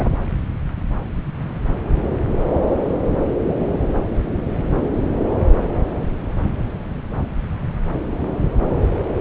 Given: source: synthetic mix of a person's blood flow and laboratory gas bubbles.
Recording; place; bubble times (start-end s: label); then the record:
Doppler ultrasound of blood flow; subclavian vein
0.00-0.17 s: bubbles
From the record:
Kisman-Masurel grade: 113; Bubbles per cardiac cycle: 1 to 2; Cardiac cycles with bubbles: 1 to 10%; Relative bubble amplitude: loud (0.450 to 0.775); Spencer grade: 1 (occasional bubble signal discernible with the cardiac motion signal, with majority of cardiac periods free of bubbles); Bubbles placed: anywhere in the cardiac cycle